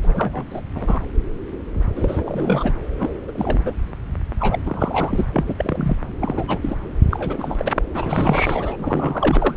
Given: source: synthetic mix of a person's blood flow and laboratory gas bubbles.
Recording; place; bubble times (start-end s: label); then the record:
Doppler ultrasound of blood flow; subclavian vein
0.02-0.44 s: bubbles
0.50-0.61 s: bubbles
0.75-1.00 s: bubbles
1.96-2.73 s: bubbles
2.99-3.10 s: bubbles
3.27-3.31 s: bubbles
3.34-3.73 s: bubbles
4.39-4.59 s: bubbles
4.66-5.25 s: bubbles
5.33-5.54 s: bubbles
5.58-5.97 s: bubbles
6.20-6.58 s: bubbles
6.62-6.77 s: bubbles
7.09-7.72 s: bubbles
7.93-9.55 s: bubbles
From the record:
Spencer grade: 3 (all of the cardiac periods contain showers or single bubble signals, but not dominating or overriding the cardiac motion signals); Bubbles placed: anywhere in the cardiac cycle